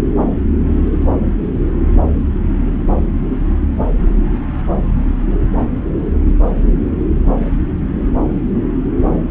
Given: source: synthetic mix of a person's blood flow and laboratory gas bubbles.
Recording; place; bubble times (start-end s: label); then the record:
Doppler ultrasound of blood flow; subclavian vein
no bubbles
From the record:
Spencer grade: 0 (complete lack of bubble signals)